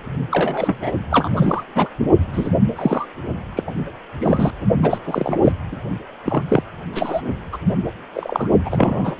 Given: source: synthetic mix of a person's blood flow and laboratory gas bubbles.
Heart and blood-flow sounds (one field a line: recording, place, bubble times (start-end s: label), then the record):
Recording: Doppler ultrasound of blood flow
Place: precordium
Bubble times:
0.30-0.92 s: bubbles
1.10-1.64 s: bubbles
1.75-1.89 s: bubbles
2.32-2.50 s: bubbles
2.75-3.06 s: bubbles
3.56-3.63 s: bubbles
3.67-3.71 s: bubbles
4.20-4.51 s: bubbles
4.82-4.98 s: bubbles
5.04-5.39 s: bubbles
5.42-5.52 s: bubbles
5.71-5.76 s: bubbles
6.25-6.43 s: bubbles
6.48-6.63 s: bubbles
6.92-7.21 s: bubbles
7.52-7.58 s: bubbles
8.14-8.49 s: bubbles
8.65-9.15 s: bubbles
9.18-9.20 s: bubbles
From the record:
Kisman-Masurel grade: 243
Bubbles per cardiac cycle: several, 3 to 8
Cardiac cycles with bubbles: 100%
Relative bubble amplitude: loud (0.450 to 0.775)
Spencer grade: 3 (all of the cardiac periods contain showers or single bubble signals, but not dominating or overriding the cardiac motion signals)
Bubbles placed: only in the low amplitude regions of the cardiac cycle